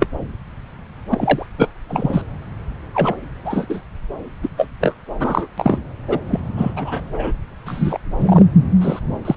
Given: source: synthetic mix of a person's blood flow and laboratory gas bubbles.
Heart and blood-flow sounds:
Doppler ultrasound of blood flow; subclavian vein
0.00-0.07 s: bubbles
1.10-1.47 s: bubbles
1.57-1.69 s: bubbles
1.88-2.21 s: bubbles
2.94-3.15 s: bubbles
3.44-3.65 s: bubbles
3.69-3.81 s: bubbles
4.42-4.48 s: bubbles
4.57-4.68 s: bubbles
4.81-4.95 s: bubbles
5.19-5.47 s: bubbles
5.58-5.82 s: bubbles
6.08-6.20 s: bubbles
6.28-6.40 s: bubbles
6.56-6.73 s: bubbles
6.76-7.00 s: bubbles
7.12-7.33 s: bubbles
7.66-8.00 s: bubbles
8.18-8.45 s: bubbles
8.81-8.99 s: bubbles
9.25-9.35 s: bubbles
From the record:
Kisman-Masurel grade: 243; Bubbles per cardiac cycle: several, 3 to 8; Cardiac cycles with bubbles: 100%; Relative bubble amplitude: loud (0.450 to 0.775); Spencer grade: 3 (all of the cardiac periods contain showers or single bubble signals, but not dominating or overriding the cardiac motion signals); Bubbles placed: anywhere in the cardiac cycle

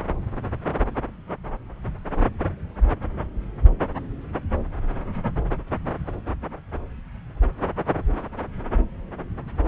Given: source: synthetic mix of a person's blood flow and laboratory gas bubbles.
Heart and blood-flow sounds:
Doppler ultrasound of blood flow; subclavian vein
no bubbles
From the record:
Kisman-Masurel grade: 000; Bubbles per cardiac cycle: 0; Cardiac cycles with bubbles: 0%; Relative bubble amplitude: no bubbles discernible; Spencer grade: 0 (complete lack of bubble signals)

